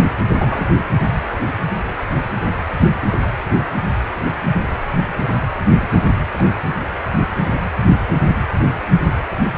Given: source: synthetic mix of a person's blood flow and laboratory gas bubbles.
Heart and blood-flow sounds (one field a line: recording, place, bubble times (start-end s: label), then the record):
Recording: Doppler ultrasound of blood flow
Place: precordium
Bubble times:
0.39-0.67 s: bubbles
3.12-3.19 s: bubbles
5.82-5.86 s: bubbles
6.38-6.43 s: bubbles
7.30-7.36 s: bubbles
From the record:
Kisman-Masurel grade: 121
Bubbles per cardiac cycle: 1 to 2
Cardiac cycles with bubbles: 10 to 50%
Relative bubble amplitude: barely perceptible (0.100 to 0.250)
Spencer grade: 2 (many but less than half of the cardiac periods contain bubble signals, singularly or in groups)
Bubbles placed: anywhere in the cardiac cycle